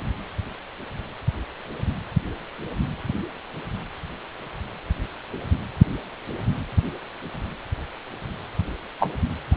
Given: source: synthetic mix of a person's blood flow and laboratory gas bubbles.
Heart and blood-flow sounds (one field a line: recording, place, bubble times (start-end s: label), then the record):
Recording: Doppler ultrasound of blood flow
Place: precordium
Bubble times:
9.00-9.09 s: bubbles
From the record:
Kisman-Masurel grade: 113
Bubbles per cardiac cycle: 1 to 2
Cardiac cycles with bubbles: 1 to 10%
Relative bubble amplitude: loud (0.450 to 0.775)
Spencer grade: 1 (occasional bubble signal discernible with the cardiac motion signal, with majority of cardiac periods free of bubbles)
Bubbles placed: anywhere in the cardiac cycle